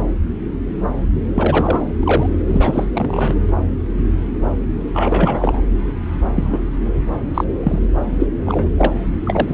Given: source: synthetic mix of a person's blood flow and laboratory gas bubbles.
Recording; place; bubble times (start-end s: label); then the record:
Doppler ultrasound of blood flow; subclavian vein
1.35-1.85 s: bubbles
1.99-2.27 s: bubbles
2.48-2.85 s: bubbles
2.94-3.35 s: bubbles
4.94-5.62 s: bubbles
6.34-6.59 s: bubbles
7.34-7.45 s: bubbles
7.63-7.79 s: bubbles
8.20-8.27 s: bubbles
8.46-8.69 s: bubbles
8.78-8.92 s: bubbles
9.25-9.54 s: bubbles
From the record:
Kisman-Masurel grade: 233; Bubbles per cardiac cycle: several, 3 to 8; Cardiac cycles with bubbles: 50 to 99%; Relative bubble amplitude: loud (0.450 to 0.775); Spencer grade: 3 (all of the cardiac periods contain showers or single bubble signals, but not dominating or overriding the cardiac motion signals); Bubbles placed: anywhere in the cardiac cycle